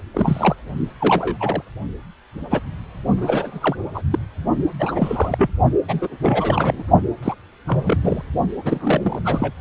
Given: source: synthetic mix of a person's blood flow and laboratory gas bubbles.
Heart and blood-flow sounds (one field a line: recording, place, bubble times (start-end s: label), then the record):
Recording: Doppler ultrasound of blood flow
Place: precordium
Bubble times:
0.14-0.55 s: bubbles
0.99-1.37 s: bubbles
1.40-1.62 s: bubbles
2.50-2.59 s: bubbles
3.17-3.76 s: bubbles
3.94-4.03 s: bubbles
4.11-4.19 s: bubbles
4.79-5.50 s: bubbles
5.88-6.10 s: bubbles
6.21-6.83 s: bubbles
7.23-7.36 s: bubbles
7.67-8.22 s: bubbles
8.64-9.22 s: bubbles
9.25-9.53 s: bubbles
From the record:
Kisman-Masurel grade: 242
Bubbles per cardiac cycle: several, 3 to 8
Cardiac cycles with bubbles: 100%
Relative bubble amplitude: moderate (0.250 to 0.450)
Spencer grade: 3 (all of the cardiac periods contain showers or single bubble signals, but not dominating or overriding the cardiac motion signals)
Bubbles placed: only in the low amplitude regions of the cardiac cycle